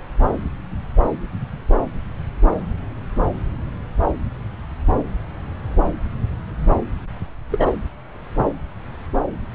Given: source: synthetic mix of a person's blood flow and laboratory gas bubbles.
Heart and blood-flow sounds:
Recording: Doppler ultrasound of blood flow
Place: subclavian vein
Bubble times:
7.50-7.72 s: bubbles
From the record:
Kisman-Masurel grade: 112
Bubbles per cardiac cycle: 1 to 2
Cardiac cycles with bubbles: 1 to 10%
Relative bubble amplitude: moderate (0.250 to 0.450)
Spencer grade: 1 (occasional bubble signal discernible with the cardiac motion signal, with majority of cardiac periods free of bubbles)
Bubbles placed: anywhere in the cardiac cycle

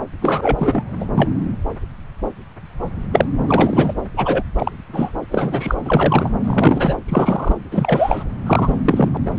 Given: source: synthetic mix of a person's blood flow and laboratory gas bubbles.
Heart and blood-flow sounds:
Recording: Doppler ultrasound of blood flow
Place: subclavian vein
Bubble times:
0.21-0.82 s: bubbles
1.00-1.05 s: bubbles
1.15-1.29 s: bubbles
3.12-3.28 s: bubbles
3.48-3.94 s: bubbles
4.17-4.44 s: bubbles
4.58-4.71 s: bubbles
4.92-5.12 s: bubbles
5.30-5.75 s: bubbles
5.84-6.30 s: bubbles
6.43-6.96 s: bubbles
7.08-7.54 s: bubbles
7.71-8.24 s: bubbles
8.46-8.80 s: bubbles
8.84-9.17 s: bubbles
9.25-9.31 s: bubbles
9.37-9.39 s: bubbles
From the record:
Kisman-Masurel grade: 233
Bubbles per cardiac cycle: several, 3 to 8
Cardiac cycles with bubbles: 50 to 99%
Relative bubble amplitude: loud (0.450 to 0.775)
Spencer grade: 3 (all of the cardiac periods contain showers or single bubble signals, but not dominating or overriding the cardiac motion signals)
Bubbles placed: anywhere in the cardiac cycle

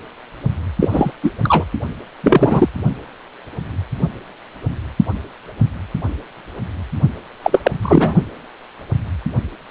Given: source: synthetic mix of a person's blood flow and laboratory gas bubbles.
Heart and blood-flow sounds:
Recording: Doppler ultrasound of blood flow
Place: precordium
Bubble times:
0.80-1.11 s: bubbles
1.23-1.31 s: bubbles
1.43-1.65 s: bubbles
2.23-2.69 s: bubbles
7.42-7.71 s: bubbles
7.82-8.16 s: bubbles
From the record:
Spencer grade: 2 (many but less than half of the cardiac periods contain bubble signals, singularly or in groups)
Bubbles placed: only in the low amplitude regions of the cardiac cycle

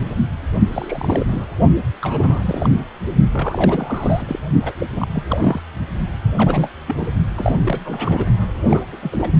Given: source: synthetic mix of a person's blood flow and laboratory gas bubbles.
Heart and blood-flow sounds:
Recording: Doppler ultrasound of blood flow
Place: precordium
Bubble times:
0.05-0.16 s: bubbles
0.70-1.46 s: bubbles
2.01-2.75 s: bubbles
3.33-4.39 s: bubbles
4.61-4.72 s: bubbles
4.78-4.86 s: bubbles
4.95-5.07 s: bubbles
5.12-5.23 s: bubbles
5.28-5.61 s: bubbles
6.35-6.69 s: bubbles
6.87-7.07 s: bubbles
7.36-7.56 s: bubbles
7.65-7.79 s: bubbles
7.85-8.26 s: bubbles
8.57-8.83 s: bubbles
8.92-9.30 s: bubbles
From the record:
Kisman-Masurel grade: 342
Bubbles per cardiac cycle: rolling drumbeat, 9 or more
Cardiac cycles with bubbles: 100%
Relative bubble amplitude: moderate (0.250 to 0.450)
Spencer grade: 3 (all of the cardiac periods contain showers or single bubble signals, but not dominating or overriding the cardiac motion signals)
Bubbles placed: only in the low amplitude regions of the cardiac cycle

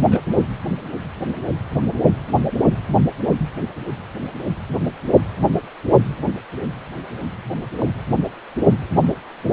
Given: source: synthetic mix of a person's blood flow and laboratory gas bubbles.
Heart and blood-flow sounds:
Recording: Doppler ultrasound of blood flow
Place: precordium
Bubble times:
0.00-0.41 s: bubbles
7.80-7.86 s: bubbles
From the record:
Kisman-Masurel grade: 121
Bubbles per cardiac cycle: 1 to 2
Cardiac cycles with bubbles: 10 to 50%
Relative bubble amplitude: barely perceptible (0.100 to 0.250)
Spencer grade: 2 (many but less than half of the cardiac periods contain bubble signals, singularly or in groups)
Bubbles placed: only in the low amplitude regions of the cardiac cycle

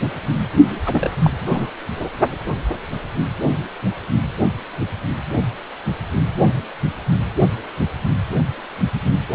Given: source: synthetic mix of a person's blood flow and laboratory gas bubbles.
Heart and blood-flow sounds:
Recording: Doppler ultrasound of blood flow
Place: precordium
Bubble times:
0.85-1.10 s: bubbles
1.23-1.31 s: bubbles
1.41-1.70 s: bubbles
From the record:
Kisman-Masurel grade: 212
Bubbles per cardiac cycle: several, 3 to 8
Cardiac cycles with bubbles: 1 to 10%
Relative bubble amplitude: moderate (0.250 to 0.450)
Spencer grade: 1 (occasional bubble signal discernible with the cardiac motion signal, with majority of cardiac periods free of bubbles)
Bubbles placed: only in the low amplitude regions of the cardiac cycle

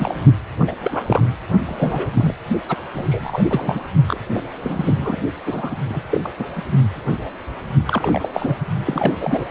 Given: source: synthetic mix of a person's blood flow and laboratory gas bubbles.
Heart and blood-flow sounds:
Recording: Doppler ultrasound of blood flow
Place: precordium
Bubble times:
0.00-0.15 s: bubbles
0.59-0.76 s: bubbles
0.83-1.22 s: bubbles
1.65-2.34 s: bubbles
2.69-2.76 s: bubbles
2.94-3.44 s: bubbles
3.50-3.81 s: bubbles
4.08-4.20 s: bubbles
4.34-4.43 s: bubbles
4.62-5.21 s: bubbles
5.46-5.75 s: bubbles
5.88-6.29 s: bubbles
6.38-6.46 s: bubbles
6.55-6.63 s: bubbles
7.86-8.29 s: bubbles
8.34-8.57 s: bubbles
8.84-9.45 s: bubbles
From the record:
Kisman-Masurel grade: 232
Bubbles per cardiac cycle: several, 3 to 8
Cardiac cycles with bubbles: 50 to 99%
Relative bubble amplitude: moderate (0.250 to 0.450)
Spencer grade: 3 (all of the cardiac periods contain showers or single bubble signals, but not dominating or overriding the cardiac motion signals)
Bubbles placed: only in the low amplitude regions of the cardiac cycle

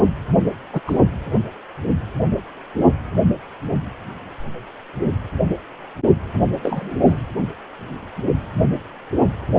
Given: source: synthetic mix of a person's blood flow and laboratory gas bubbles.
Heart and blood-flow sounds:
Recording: Doppler ultrasound of blood flow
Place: precordium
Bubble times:
0.72-0.81 s: bubbles
0.86-0.98 s: bubbles
6.62-6.95 s: bubbles
7.04-7.23 s: bubbles
From the record:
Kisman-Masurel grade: 222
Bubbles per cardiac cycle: several, 3 to 8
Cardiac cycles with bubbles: 10 to 50%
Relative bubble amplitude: moderate (0.250 to 0.450)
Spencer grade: 2 (many but less than half of the cardiac periods contain bubble signals, singularly or in groups)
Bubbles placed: anywhere in the cardiac cycle

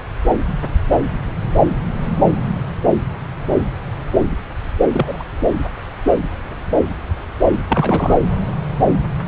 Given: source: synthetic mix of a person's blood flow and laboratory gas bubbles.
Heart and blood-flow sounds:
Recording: Doppler ultrasound of blood flow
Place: subclavian vein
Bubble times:
4.92-5.23 s: bubbles
7.68-8.17 s: bubbles
From the record:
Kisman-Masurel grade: 222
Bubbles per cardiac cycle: several, 3 to 8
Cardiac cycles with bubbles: 10 to 50%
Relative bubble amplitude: moderate (0.250 to 0.450)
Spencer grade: 2 (many but less than half of the cardiac periods contain bubble signals, singularly or in groups)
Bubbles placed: anywhere in the cardiac cycle

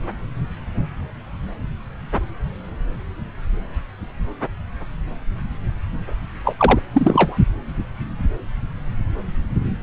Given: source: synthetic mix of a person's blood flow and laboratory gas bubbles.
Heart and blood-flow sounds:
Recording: Doppler ultrasound of blood flow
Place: subclavian vein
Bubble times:
6.44-6.79 s: bubbles
6.94-7.38 s: bubbles
From the record:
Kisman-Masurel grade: 213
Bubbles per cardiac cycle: several, 3 to 8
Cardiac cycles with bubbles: 1 to 10%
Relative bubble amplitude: loud (0.450 to 0.775)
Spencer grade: 1 (occasional bubble signal discernible with the cardiac motion signal, with majority of cardiac periods free of bubbles)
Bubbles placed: anywhere in the cardiac cycle

